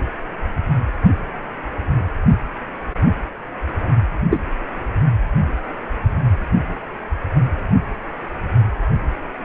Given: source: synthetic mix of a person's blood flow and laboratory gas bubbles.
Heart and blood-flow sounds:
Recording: Doppler ultrasound of blood flow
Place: precordium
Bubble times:
4.31-4.38 s: bubbles
From the record:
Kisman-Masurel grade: 113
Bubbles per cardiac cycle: 1 to 2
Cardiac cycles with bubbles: 1 to 10%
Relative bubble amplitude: loud (0.450 to 0.775)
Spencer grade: 1 (occasional bubble signal discernible with the cardiac motion signal, with majority of cardiac periods free of bubbles)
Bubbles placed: only in the low amplitude regions of the cardiac cycle

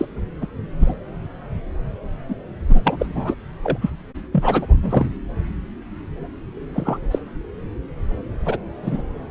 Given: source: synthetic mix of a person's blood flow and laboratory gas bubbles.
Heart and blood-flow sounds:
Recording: Doppler ultrasound of blood flow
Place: subclavian vein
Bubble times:
0.00-0.05 s: bubbles
0.41-0.47 s: bubbles
0.80-0.94 s: bubbles
2.28-2.35 s: bubbles
2.69-2.96 s: bubbles
2.99-3.34 s: bubbles
3.63-3.78 s: bubbles
3.81-3.90 s: bubbles
4.31-4.66 s: bubbles
4.82-5.09 s: bubbles
6.74-6.98 s: bubbles
7.11-7.18 s: bubbles
8.46-8.57 s: bubbles
8.82-9.03 s: bubbles
From the record:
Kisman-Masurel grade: 232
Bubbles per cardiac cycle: several, 3 to 8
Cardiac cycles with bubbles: 50 to 99%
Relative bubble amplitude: moderate (0.250 to 0.450)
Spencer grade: 3 (all of the cardiac periods contain showers or single bubble signals, but not dominating or overriding the cardiac motion signals)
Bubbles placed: anywhere in the cardiac cycle

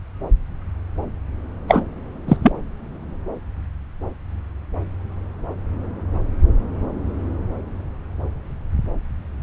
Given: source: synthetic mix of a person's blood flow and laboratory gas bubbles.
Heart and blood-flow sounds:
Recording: Doppler ultrasound of blood flow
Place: subclavian vein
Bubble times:
1.67-1.83 s: bubbles
2.28-2.36 s: bubbles
2.43-2.52 s: bubbles
From the record:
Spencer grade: 2 (many but less than half of the cardiac periods contain bubble signals, singularly or in groups)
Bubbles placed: anywhere in the cardiac cycle

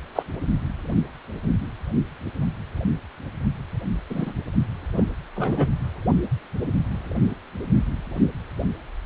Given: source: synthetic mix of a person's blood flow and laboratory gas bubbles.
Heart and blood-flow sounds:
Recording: Doppler ultrasound of blood flow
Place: precordium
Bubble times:
0.15-0.22 s: bubbles
4.10-4.33 s: bubbles
4.96-5.04 s: bubbles
5.36-5.70 s: bubbles
From the record:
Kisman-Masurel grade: 122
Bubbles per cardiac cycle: 1 to 2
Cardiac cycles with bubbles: 10 to 50%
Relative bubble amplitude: moderate (0.250 to 0.450)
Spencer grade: 2 (many but less than half of the cardiac periods contain bubble signals, singularly or in groups)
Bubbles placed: anywhere in the cardiac cycle

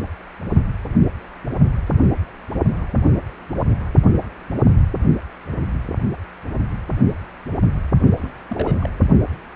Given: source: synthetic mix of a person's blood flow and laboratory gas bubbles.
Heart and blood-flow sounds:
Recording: Doppler ultrasound of blood flow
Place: precordium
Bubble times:
8.21-8.32 s: bubbles
8.49-8.75 s: bubbles
8.80-8.89 s: bubbles
From the record:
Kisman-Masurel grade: 211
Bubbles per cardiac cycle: several, 3 to 8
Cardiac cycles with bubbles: 1 to 10%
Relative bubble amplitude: barely perceptible (0.100 to 0.250)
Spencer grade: 1 (occasional bubble signal discernible with the cardiac motion signal, with majority of cardiac periods free of bubbles)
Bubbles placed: only in the low amplitude regions of the cardiac cycle

